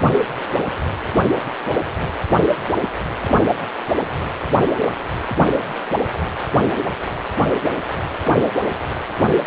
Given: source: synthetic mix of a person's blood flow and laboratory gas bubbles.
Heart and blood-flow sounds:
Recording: Doppler ultrasound of blood flow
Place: precordium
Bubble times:
no bubbles
From the record:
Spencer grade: 0 (complete lack of bubble signals)

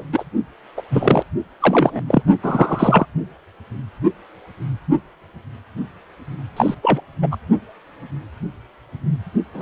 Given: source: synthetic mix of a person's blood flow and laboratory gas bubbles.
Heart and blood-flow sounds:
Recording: Doppler ultrasound of blood flow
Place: precordium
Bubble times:
0.00-0.04 s: bubbles
0.12-0.24 s: bubbles
0.77-0.82 s: bubbles
0.90-1.23 s: bubbles
1.60-2.01 s: bubbles
2.08-2.23 s: bubbles
2.43-3.06 s: bubbles
6.56-6.75 s: bubbles
6.82-7.00 s: bubbles
7.22-7.36 s: bubbles
9.54-9.62 s: bubbles
From the record:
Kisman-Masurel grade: 233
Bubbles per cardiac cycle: several, 3 to 8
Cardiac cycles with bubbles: 50 to 99%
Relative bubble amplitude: loud (0.450 to 0.775)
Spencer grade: 3 (all of the cardiac periods contain showers or single bubble signals, but not dominating or overriding the cardiac motion signals)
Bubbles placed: only in the low amplitude regions of the cardiac cycle

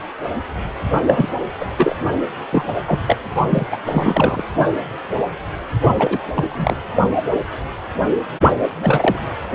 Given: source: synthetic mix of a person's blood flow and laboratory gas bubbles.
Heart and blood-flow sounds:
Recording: Doppler ultrasound of blood flow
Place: precordium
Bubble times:
1.06-1.29 s: bubbles
1.59-1.65 s: bubbles
1.77-1.95 s: bubbles
2.52-2.64 s: bubbles
2.87-2.99 s: bubbles
3.07-3.17 s: bubbles
3.49-3.67 s: bubbles
3.71-3.78 s: bubbles
3.86-4.43 s: bubbles
5.93-6.23 s: bubbles
6.35-6.76 s: bubbles
8.82-9.19 s: bubbles
From the record:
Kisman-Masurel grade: 233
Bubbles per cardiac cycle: several, 3 to 8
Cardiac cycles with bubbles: 50 to 99%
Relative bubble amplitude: loud (0.450 to 0.775)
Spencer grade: 3 (all of the cardiac periods contain showers or single bubble signals, but not dominating or overriding the cardiac motion signals)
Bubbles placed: only in the low amplitude regions of the cardiac cycle

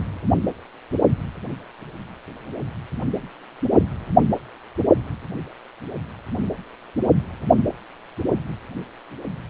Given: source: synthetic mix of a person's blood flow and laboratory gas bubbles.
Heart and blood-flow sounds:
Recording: Doppler ultrasound of blood flow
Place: precordium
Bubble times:
3.79-3.84 s: bubbles
From the record:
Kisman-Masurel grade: 111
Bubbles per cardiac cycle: 1 to 2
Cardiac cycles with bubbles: 1 to 10%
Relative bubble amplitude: barely perceptible (0.100 to 0.250)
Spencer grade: 1 (occasional bubble signal discernible with the cardiac motion signal, with majority of cardiac periods free of bubbles)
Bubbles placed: anywhere in the cardiac cycle

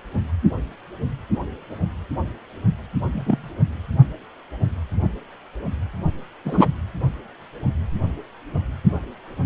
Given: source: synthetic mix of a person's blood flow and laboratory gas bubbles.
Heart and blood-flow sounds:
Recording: Doppler ultrasound of blood flow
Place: precordium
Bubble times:
3.12-3.53 s: bubbles
6.45-6.66 s: bubbles
From the record:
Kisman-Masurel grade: 123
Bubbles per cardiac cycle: 1 to 2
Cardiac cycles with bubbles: 10 to 50%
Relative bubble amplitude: loud (0.450 to 0.775)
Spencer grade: 2 (many but less than half of the cardiac periods contain bubble signals, singularly or in groups)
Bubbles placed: anywhere in the cardiac cycle

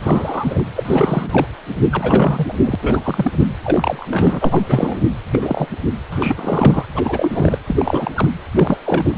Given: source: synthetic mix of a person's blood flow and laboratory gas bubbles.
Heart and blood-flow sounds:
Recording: Doppler ultrasound of blood flow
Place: precordium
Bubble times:
0.02-0.65 s: bubbles
0.76-1.47 s: bubbles
1.92-2.54 s: bubbles
2.59-2.75 s: bubbles
2.82-3.00 s: bubbles
3.03-3.32 s: bubbles
3.38-3.46 s: bubbles
3.64-4.06 s: bubbles
4.10-5.06 s: bubbles
5.31-5.67 s: bubbles
6.11-6.85 s: bubbles
6.95-7.59 s: bubbles
7.67-8.11 s: bubbles
8.16-8.28 s: bubbles
8.54-8.78 s: bubbles
8.86-9.18 s: bubbles
From the record:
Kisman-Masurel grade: 342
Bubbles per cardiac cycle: rolling drumbeat, 9 or more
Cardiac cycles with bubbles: 100%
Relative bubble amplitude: moderate (0.250 to 0.450)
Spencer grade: 3 (all of the cardiac periods contain showers or single bubble signals, but not dominating or overriding the cardiac motion signals)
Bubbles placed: anywhere in the cardiac cycle

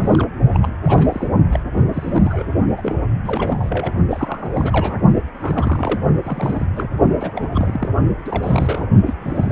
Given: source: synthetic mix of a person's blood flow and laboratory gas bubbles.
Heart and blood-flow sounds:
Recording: Doppler ultrasound of blood flow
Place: precordium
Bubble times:
0.00-0.27 s: bubbles
0.51-0.72 s: bubbles
0.84-1.29 s: bubbles
1.52-1.60 s: bubbles
1.73-1.83 s: bubbles
1.92-2.44 s: bubbles
2.76-2.95 s: bubbles
3.23-3.93 s: bubbles
4.10-5.03 s: bubbles
5.15-5.22 s: bubbles
5.40-6.00 s: bubbles
6.24-6.65 s: bubbles
6.75-6.89 s: bubbles
7.19-7.32 s: bubbles
7.35-7.49 s: bubbles
7.54-7.89 s: bubbles
8.24-8.87 s: bubbles
9.06-9.13 s: bubbles
9.18-9.52 s: bubbles
From the record:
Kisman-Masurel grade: 342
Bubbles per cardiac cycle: rolling drumbeat, 9 or more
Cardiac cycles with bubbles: 100%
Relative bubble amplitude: moderate (0.250 to 0.450)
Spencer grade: 3 (all of the cardiac periods contain showers or single bubble signals, but not dominating or overriding the cardiac motion signals)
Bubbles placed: only in the low amplitude regions of the cardiac cycle

